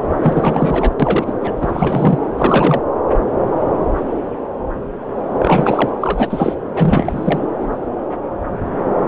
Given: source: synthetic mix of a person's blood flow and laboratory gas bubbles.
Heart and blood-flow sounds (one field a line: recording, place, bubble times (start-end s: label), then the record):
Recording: Doppler ultrasound of blood flow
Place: subclavian vein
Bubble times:
0.16-0.95 s: bubbles
1.00-1.37 s: bubbles
1.41-1.52 s: bubbles
1.61-2.19 s: bubbles
2.37-2.82 s: bubbles
5.39-5.89 s: bubbles
6.00-6.55 s: bubbles
6.74-7.39 s: bubbles
From the record:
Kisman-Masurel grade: 333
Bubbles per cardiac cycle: rolling drumbeat, 9 or more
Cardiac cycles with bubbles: 50 to 99%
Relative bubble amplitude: loud (0.450 to 0.775)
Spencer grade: 3 (all of the cardiac periods contain showers or single bubble signals, but not dominating or overriding the cardiac motion signals)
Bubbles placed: anywhere in the cardiac cycle